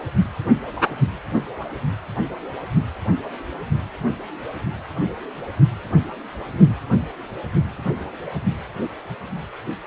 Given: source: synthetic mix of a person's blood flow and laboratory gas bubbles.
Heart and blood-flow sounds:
Doppler ultrasound of blood flow; precordium
no bubbles
From the record:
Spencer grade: 0 (complete lack of bubble signals)

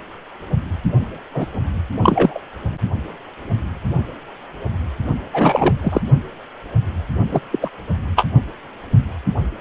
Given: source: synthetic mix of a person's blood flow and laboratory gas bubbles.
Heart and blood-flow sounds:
Doppler ultrasound of blood flow; precordium
1.34-1.46 s: bubbles
2.02-2.40 s: bubbles
5.33-5.75 s: bubbles
5.81-6.01 s: bubbles
7.31-7.40 s: bubbles
7.51-7.59 s: bubbles
7.62-7.71 s: bubbles
8.16-8.26 s: bubbles
From the record:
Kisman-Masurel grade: 223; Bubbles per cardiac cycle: several, 3 to 8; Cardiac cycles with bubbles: 10 to 50%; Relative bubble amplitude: loud (0.450 to 0.775); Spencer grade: 2 (many but less than half of the cardiac periods contain bubble signals, singularly or in groups); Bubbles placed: only in the low amplitude regions of the cardiac cycle

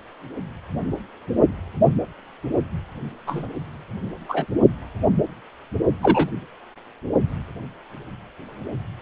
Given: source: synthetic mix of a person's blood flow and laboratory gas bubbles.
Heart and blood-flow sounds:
Doppler ultrasound of blood flow; precordium
3.27-3.48 s: bubbles
4.29-4.46 s: bubbles
6.02-6.29 s: bubbles
From the record:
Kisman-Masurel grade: 123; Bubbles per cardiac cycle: 1 to 2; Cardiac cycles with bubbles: 10 to 50%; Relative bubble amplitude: loud (0.450 to 0.775); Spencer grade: 2 (many but less than half of the cardiac periods contain bubble signals, singularly or in groups); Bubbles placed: only in the low amplitude regions of the cardiac cycle

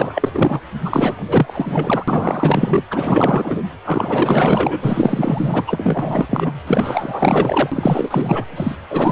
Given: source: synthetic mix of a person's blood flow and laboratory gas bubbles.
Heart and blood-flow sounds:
Doppler ultrasound of blood flow; precordium
0.00-0.60 s: bubbles
0.84-2.05 s: bubbles
2.08-2.83 s: bubbles
2.90-3.63 s: bubbles
3.85-5.63 s: bubbles
5.67-6.26 s: bubbles
6.29-6.52 s: bubbles
6.67-8.45 s: bubbles
8.56-8.76 s: bubbles
8.90-9.12 s: bubbles
From the record:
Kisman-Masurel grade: 444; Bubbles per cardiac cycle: continuous sound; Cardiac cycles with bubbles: 100%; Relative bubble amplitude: maximal (0.775 to 0.999); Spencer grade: 4 (maximum detectable bubble signal sounding continuously throughout systole and diastole of every cardiac period, and overriding the amplitude of the normal cardiac signals); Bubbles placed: anywhere in the cardiac cycle

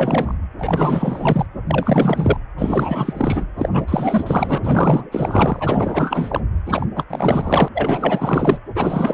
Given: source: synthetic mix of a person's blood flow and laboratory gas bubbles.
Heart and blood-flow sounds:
Doppler ultrasound of blood flow; precordium
0.00-0.34 s: bubbles
0.59-1.46 s: bubbles
1.67-2.37 s: bubbles
2.57-3.46 s: bubbles
3.58-3.70 s: bubbles
3.72-4.60 s: bubbles
4.64-6.40 s: bubbles
6.66-6.86 s: bubbles
6.95-7.04 s: bubbles
7.10-7.68 s: bubbles
7.74-8.58 s: bubbles
8.74-9.14 s: bubbles
From the record:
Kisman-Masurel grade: 444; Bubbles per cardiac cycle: continuous sound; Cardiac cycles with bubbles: 100%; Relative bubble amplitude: maximal (0.775 to 0.999); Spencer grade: 4 (maximum detectable bubble signal sounding continuously throughout systole and diastole of every cardiac period, and overriding the amplitude of the normal cardiac signals); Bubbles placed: anywhere in the cardiac cycle

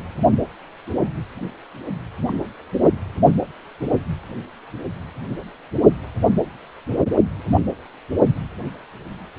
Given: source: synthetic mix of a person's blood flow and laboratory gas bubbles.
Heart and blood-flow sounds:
Doppler ultrasound of blood flow; precordium
2.27-2.33 s: bubbles
From the record:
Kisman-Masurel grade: 121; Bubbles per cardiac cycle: 1 to 2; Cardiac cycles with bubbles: 10 to 50%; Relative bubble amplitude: barely perceptible (0.100 to 0.250); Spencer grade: 2 (many but less than half of the cardiac periods contain bubble signals, singularly or in groups); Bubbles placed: only in the low amplitude regions of the cardiac cycle

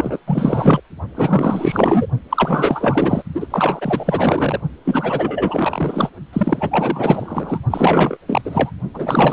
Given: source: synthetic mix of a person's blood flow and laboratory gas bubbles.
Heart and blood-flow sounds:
Doppler ultrasound of blood flow; precordium
0.00-0.20 s: bubbles
0.27-0.82 s: bubbles
1.15-2.06 s: bubbles
2.29-3.22 s: bubbles
3.34-3.47 s: bubbles
3.50-4.60 s: bubbles
4.85-6.09 s: bubbles
6.33-7.58 s: bubbles
7.70-8.17 s: bubbles
8.27-8.71 s: bubbles
8.94-9.33 s: bubbles
From the record:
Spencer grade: 4 (maximum detectable bubble signal sounding continuously throughout systole and diastole of every cardiac period, and overriding the amplitude of the normal cardiac signals); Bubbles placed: only in the low amplitude regions of the cardiac cycle

